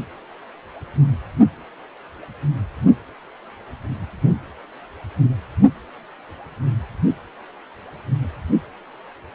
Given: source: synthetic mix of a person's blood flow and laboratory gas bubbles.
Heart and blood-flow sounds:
Doppler ultrasound of blood flow; precordium
no bubbles
From the record:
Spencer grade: 0 (complete lack of bubble signals)

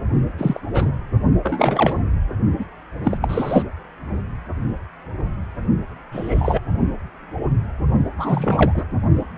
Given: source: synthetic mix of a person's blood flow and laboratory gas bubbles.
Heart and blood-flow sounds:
Doppler ultrasound of blood flow; precordium
0.38-0.60 s: bubbles
0.73-0.91 s: bubbles
1.43-2.00 s: bubbles
2.58-2.65 s: bubbles
3.03-3.17 s: bubbles
3.21-3.63 s: bubbles
6.12-6.60 s: bubbles
8.17-8.84 s: bubbles
From the record:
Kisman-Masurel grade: 232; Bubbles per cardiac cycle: several, 3 to 8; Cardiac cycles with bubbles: 50 to 99%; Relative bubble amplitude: moderate (0.250 to 0.450); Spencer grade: 3 (all of the cardiac periods contain showers or single bubble signals, but not dominating or overriding the cardiac motion signals); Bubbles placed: only in the low amplitude regions of the cardiac cycle

